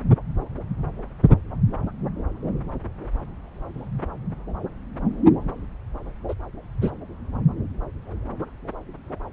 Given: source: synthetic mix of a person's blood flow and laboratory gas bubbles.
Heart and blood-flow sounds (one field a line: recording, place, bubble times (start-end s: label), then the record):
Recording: Doppler ultrasound of blood flow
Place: subclavian vein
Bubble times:
6.29-6.34 s: bubbles
6.81-6.91 s: bubbles
From the record:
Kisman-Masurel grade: 113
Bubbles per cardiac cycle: 1 to 2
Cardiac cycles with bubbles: 1 to 10%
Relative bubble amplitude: loud (0.450 to 0.775)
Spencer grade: 1 (occasional bubble signal discernible with the cardiac motion signal, with majority of cardiac periods free of bubbles)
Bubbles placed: anywhere in the cardiac cycle